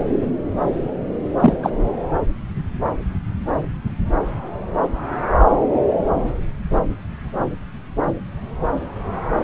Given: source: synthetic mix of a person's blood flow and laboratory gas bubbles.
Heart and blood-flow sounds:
Doppler ultrasound of blood flow; subclavian vein
1.40-1.59 s: bubbles
1.62-1.71 s: bubbles
From the record:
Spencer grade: 1 (occasional bubble signal discernible with the cardiac motion signal, with majority of cardiac periods free of bubbles); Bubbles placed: anywhere in the cardiac cycle

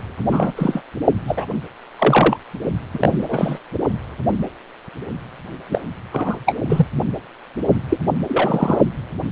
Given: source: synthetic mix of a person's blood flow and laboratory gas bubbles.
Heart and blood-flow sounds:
Doppler ultrasound of blood flow; precordium
0.31-0.53 s: bubbles
0.56-0.82 s: bubbles
1.27-1.46 s: bubbles
1.99-2.37 s: bubbles
2.94-3.59 s: bubbles
5.71-5.81 s: bubbles
6.12-6.37 s: bubbles
6.46-6.57 s: bubbles
6.69-6.86 s: bubbles
7.90-7.98 s: bubbles
8.28-8.79 s: bubbles
From the record:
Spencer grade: 3 (all of the cardiac periods contain showers or single bubble signals, but not dominating or overriding the cardiac motion signals); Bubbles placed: only in the low amplitude regions of the cardiac cycle

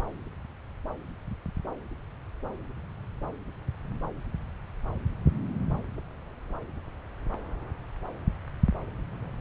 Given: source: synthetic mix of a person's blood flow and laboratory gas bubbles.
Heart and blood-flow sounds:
Doppler ultrasound of blood flow; subclavian vein
no bubbles
From the record:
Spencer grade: 0 (complete lack of bubble signals)

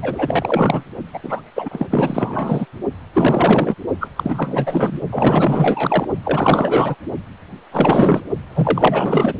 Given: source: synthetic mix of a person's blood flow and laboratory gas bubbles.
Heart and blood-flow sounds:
Doppler ultrasound of blood flow; precordium
0.02-0.83 s: bubbles
1.13-1.19 s: bubbles
1.23-1.41 s: bubbles
1.55-1.69 s: bubbles
1.71-1.87 s: bubbles
1.90-2.66 s: bubbles
3.14-3.75 s: bubbles
4.00-4.08 s: bubbles
4.16-5.01 s: bubbles
5.11-6.07 s: bubbles
6.25-6.95 s: bubbles
7.71-8.22 s: bubbles
8.55-9.33 s: bubbles
From the record:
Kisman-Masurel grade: 444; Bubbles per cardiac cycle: continuous sound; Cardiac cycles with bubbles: 100%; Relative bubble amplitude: maximal (0.775 to 0.999); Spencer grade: 4 (maximum detectable bubble signal sounding continuously throughout systole and diastole of every cardiac period, and overriding the amplitude of the normal cardiac signals); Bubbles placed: only in the low amplitude regions of the cardiac cycle

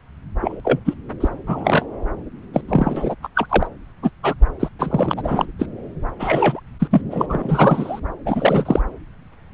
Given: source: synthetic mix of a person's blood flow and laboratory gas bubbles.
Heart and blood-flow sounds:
Doppler ultrasound of blood flow; subclavian vein
0.41-0.60 s: bubbles
0.64-0.80 s: bubbles
0.85-0.93 s: bubbles
1.20-1.29 s: bubbles
1.46-1.85 s: bubbles
2.53-2.61 s: bubbles
2.68-3.15 s: bubbles
3.23-3.28 s: bubbles
3.35-3.46 s: bubbles
3.49-3.67 s: bubbles
4.02-4.10 s: bubbles
4.23-4.34 s: bubbles
4.59-4.68 s: bubbles
4.79-5.13 s: bubbles
5.17-5.46 s: bubbles
5.59-5.66 s: bubbles
6.20-6.60 s: bubbles
6.79-6.88 s: bubbles
6.91-7.01 s: bubbles
7.10-7.26 s: bubbles
7.29-8.00 s: bubbles
8.26-8.82 s: bubbles
From the record:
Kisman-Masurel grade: 243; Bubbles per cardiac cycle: several, 3 to 8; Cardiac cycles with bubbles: 100%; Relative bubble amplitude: loud (0.450 to 0.775); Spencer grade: 3 (all of the cardiac periods contain showers or single bubble signals, but not dominating or overriding the cardiac motion signals); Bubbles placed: anywhere in the cardiac cycle

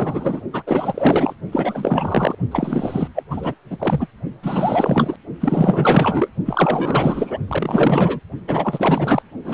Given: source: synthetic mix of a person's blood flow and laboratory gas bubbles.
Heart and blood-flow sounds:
Doppler ultrasound of blood flow; precordium
0.00-0.41 s: bubbles
0.53-0.62 s: bubbles
0.67-1.34 s: bubbles
1.52-2.35 s: bubbles
2.51-3.08 s: bubbles
3.15-3.23 s: bubbles
3.30-3.54 s: bubbles
3.70-4.07 s: bubbles
4.42-5.16 s: bubbles
5.40-6.30 s: bubbles
6.45-7.38 s: bubbles
7.47-8.20 s: bubbles
8.47-9.22 s: bubbles
9.44-9.54 s: bubbles
From the record:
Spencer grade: 4 (maximum detectable bubble signal sounding continuously throughout systole and diastole of every cardiac period, and overriding the amplitude of the normal cardiac signals); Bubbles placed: only in the low amplitude regions of the cardiac cycle

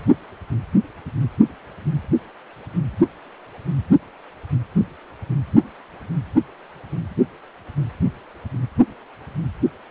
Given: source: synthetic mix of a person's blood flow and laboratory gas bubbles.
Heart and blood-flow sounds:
Doppler ultrasound of blood flow; precordium
no bubbles
From the record:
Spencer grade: 0 (complete lack of bubble signals)

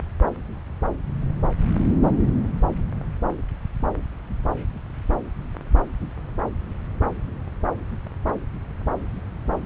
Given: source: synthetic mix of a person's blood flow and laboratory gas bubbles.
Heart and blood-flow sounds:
Doppler ultrasound of blood flow; subclavian vein
no bubbles
From the record:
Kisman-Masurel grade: 000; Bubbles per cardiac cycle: 0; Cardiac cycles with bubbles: 0%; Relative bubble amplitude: no bubbles discernible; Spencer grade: 0 (complete lack of bubble signals)

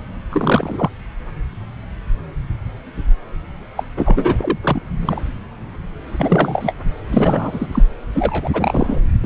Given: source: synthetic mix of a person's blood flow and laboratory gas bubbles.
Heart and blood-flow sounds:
Doppler ultrasound of blood flow; subclavian vein
0.30-0.90 s: bubbles
3.76-3.83 s: bubbles
3.96-4.36 s: bubbles
4.41-4.58 s: bubbles
4.61-4.82 s: bubbles
5.00-5.21 s: bubbles
6.11-6.74 s: bubbles
7.08-7.67 s: bubbles
7.72-7.83 s: bubbles
8.14-8.50 s: bubbles
8.53-8.99 s: bubbles
9.23-9.26 s: bubbles
From the record:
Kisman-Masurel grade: 332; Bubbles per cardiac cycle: rolling drumbeat, 9 or more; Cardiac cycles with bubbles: 50 to 99%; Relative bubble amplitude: moderate (0.250 to 0.450); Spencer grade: 3 (all of the cardiac periods contain showers or single bubble signals, but not dominating or overriding the cardiac motion signals); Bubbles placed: anywhere in the cardiac cycle

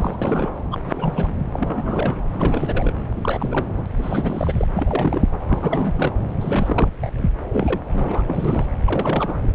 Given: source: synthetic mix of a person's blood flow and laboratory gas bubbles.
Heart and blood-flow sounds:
Doppler ultrasound of blood flow; subclavian vein
0.00-0.16 s: bubbles
0.22-0.56 s: bubbles
0.71-0.80 s: bubbles
0.83-1.33 s: bubbles
1.52-2.18 s: bubbles
2.31-2.93 s: bubbles
3.16-3.73 s: bubbles
3.95-4.67 s: bubbles
4.73-5.27 s: bubbles
5.48-6.12 s: bubbles
6.41-6.88 s: bubbles
7.01-7.13 s: bubbles
7.17-7.30 s: bubbles
7.51-7.79 s: bubbles
7.92-8.66 s: bubbles
8.85-9.37 s: bubbles
9.43-9.55 s: bubbles
From the record:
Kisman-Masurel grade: 342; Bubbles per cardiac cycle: rolling drumbeat, 9 or more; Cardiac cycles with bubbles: 100%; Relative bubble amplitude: moderate (0.250 to 0.450); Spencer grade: 3 (all of the cardiac periods contain showers or single bubble signals, but not dominating or overriding the cardiac motion signals); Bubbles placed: anywhere in the cardiac cycle

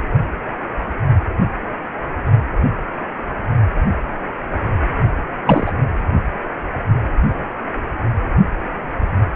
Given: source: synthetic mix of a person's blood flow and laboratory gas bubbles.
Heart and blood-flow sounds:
Doppler ultrasound of blood flow; precordium
5.46-5.72 s: bubbles
From the record:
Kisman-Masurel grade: 123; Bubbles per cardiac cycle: 1 to 2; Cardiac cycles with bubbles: 10 to 50%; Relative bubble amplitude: loud (0.450 to 0.775); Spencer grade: 2 (many but less than half of the cardiac periods contain bubble signals, singularly or in groups); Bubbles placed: anywhere in the cardiac cycle

